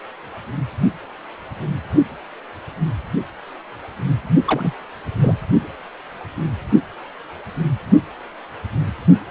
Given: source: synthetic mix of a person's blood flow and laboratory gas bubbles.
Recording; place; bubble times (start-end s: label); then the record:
Doppler ultrasound of blood flow; precordium
4.46-4.74 s: bubbles
5.20-5.35 s: bubbles
From the record:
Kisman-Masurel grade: 222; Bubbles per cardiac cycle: several, 3 to 8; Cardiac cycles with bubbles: 10 to 50%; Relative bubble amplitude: moderate (0.250 to 0.450); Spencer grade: 2 (many but less than half of the cardiac periods contain bubble signals, singularly or in groups); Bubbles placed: only in the low amplitude regions of the cardiac cycle